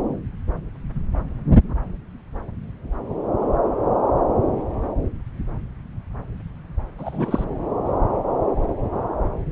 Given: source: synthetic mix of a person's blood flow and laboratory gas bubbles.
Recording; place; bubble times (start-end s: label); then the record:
Doppler ultrasound of blood flow; subclavian vein
6.98-7.44 s: bubbles
From the record:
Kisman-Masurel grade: 212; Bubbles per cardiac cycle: several, 3 to 8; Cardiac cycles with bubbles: 1 to 10%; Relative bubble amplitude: moderate (0.250 to 0.450); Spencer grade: 1 (occasional bubble signal discernible with the cardiac motion signal, with majority of cardiac periods free of bubbles); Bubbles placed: anywhere in the cardiac cycle